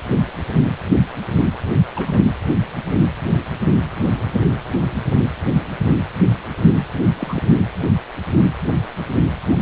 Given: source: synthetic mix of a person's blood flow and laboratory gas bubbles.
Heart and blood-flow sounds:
Doppler ultrasound of blood flow; precordium
1.95-2.20 s: bubbles
7.17-7.42 s: bubbles
From the record:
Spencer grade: 1 (occasional bubble signal discernible with the cardiac motion signal, with majority of cardiac periods free of bubbles); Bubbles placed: anywhere in the cardiac cycle

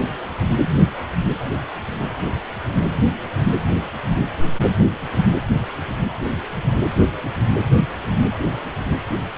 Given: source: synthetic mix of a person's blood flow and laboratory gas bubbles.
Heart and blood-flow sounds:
Doppler ultrasound of blood flow; precordium
no bubbles
From the record:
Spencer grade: 0 (complete lack of bubble signals)

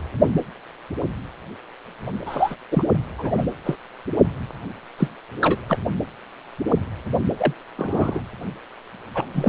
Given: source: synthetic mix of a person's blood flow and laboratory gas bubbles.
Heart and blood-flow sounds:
Doppler ultrasound of blood flow; precordium
2.25-2.56 s: bubbles
2.71-2.83 s: bubbles
3.18-3.34 s: bubbles
3.37-3.46 s: bubbles
3.64-3.75 s: bubbles
4.97-5.09 s: bubbles
5.42-5.77 s: bubbles
7.38-7.54 s: bubbles
7.78-8.21 s: bubbles
9.14-9.29 s: bubbles
9.33-9.48 s: bubbles
From the record:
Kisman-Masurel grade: 222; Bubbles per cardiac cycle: several, 3 to 8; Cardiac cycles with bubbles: 10 to 50%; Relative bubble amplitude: moderate (0.250 to 0.450); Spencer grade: 2 (many but less than half of the cardiac periods contain bubble signals, singularly or in groups); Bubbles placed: anywhere in the cardiac cycle

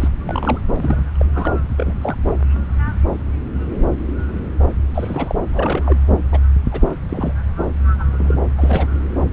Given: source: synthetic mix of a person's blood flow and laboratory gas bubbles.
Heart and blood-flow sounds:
Doppler ultrasound of blood flow; subclavian vein
0.00-0.09 s: bubbles
0.25-0.60 s: bubbles
0.76-1.00 s: bubbles
1.19-1.25 s: bubbles
1.33-1.50 s: bubbles
1.77-1.94 s: bubbles
2.01-2.16 s: bubbles
2.25-2.33 s: bubbles
4.94-5.35 s: bubbles
5.52-6.00 s: bubbles
6.32-6.40 s: bubbles
6.71-6.88 s: bubbles
7.09-7.32 s: bubbles
7.99-8.04 s: bubbles
8.11-8.38 s: bubbles
8.58-8.87 s: bubbles
From the record:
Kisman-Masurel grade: 232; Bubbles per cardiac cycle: several, 3 to 8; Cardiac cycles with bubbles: 50 to 99%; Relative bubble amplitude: moderate (0.250 to 0.450); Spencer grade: 3 (all of the cardiac periods contain showers or single bubble signals, but not dominating or overriding the cardiac motion signals); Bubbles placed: anywhere in the cardiac cycle

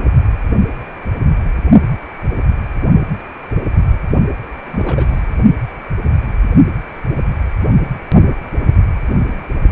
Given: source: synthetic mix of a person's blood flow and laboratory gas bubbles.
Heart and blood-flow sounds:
Doppler ultrasound of blood flow; precordium
4.65-5.20 s: bubbles
From the record:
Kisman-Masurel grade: 211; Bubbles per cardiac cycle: several, 3 to 8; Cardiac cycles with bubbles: 1 to 10%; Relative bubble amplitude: barely perceptible (0.100 to 0.250); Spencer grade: 1 (occasional bubble signal discernible with the cardiac motion signal, with majority of cardiac periods free of bubbles); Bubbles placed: only in the low amplitude regions of the cardiac cycle

